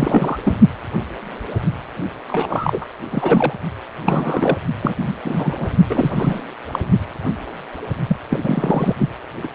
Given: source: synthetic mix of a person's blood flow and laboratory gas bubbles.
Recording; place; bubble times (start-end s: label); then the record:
Doppler ultrasound of blood flow; precordium
0.00-0.39 s: bubbles
0.44-0.57 s: bubbles
2.28-2.85 s: bubbles
3.11-3.54 s: bubbles
4.05-4.57 s: bubbles
4.81-4.94 s: bubbles
4.97-5.16 s: bubbles
5.24-5.68 s: bubbles
5.89-6.42 s: bubbles
6.72-6.79 s: bubbles
8.07-8.16 s: bubbles
8.29-8.38 s: bubbles
8.43-8.96 s: bubbles
8.98-9.09 s: bubbles
9.43-9.47 s: bubbles
From the record:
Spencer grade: 3 (all of the cardiac periods contain showers or single bubble signals, but not dominating or overriding the cardiac motion signals); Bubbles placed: only in the low amplitude regions of the cardiac cycle